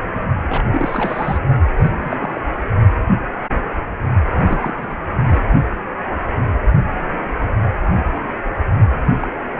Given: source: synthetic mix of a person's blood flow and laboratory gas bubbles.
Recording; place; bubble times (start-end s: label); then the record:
Doppler ultrasound of blood flow; precordium
0.51-0.64 s: bubbles
0.72-1.38 s: bubbles
1.77-1.91 s: bubbles
1.99-2.41 s: bubbles
4.33-4.74 s: bubbles
4.78-4.96 s: bubbles
5.29-5.38 s: bubbles
9.20-9.27 s: bubbles
From the record:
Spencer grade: 2 (many but less than half of the cardiac periods contain bubble signals, singularly or in groups); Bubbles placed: only in the low amplitude regions of the cardiac cycle